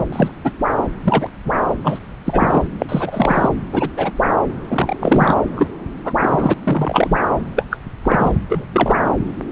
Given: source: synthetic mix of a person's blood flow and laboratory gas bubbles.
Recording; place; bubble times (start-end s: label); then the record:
Doppler ultrasound of blood flow; subclavian vein
0.12-0.30 s: bubbles
0.44-0.52 s: bubbles
1.04-1.29 s: bubbles
1.45-1.52 s: bubbles
1.83-1.99 s: bubbles
2.25-2.64 s: bubbles
2.79-2.86 s: bubbles
2.89-3.48 s: bubbles
3.71-3.89 s: bubbles
3.97-4.12 s: bubbles
4.68-4.96 s: bubbles
5.00-5.35 s: bubbles
5.55-5.70 s: bubbles
6.04-6.13 s: bubbles
6.20-6.54 s: bubbles
6.63-7.17 s: bubbles
7.56-7.65 s: bubbles
7.70-7.76 s: bubbles
8.03-8.31 s: bubbles
8.49-8.65 s: bubbles
8.72-8.98 s: bubbles
From the record:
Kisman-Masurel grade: 243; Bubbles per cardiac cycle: several, 3 to 8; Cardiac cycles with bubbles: 100%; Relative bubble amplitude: loud (0.450 to 0.775); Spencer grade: 3 (all of the cardiac periods contain showers or single bubble signals, but not dominating or overriding the cardiac motion signals); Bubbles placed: anywhere in the cardiac cycle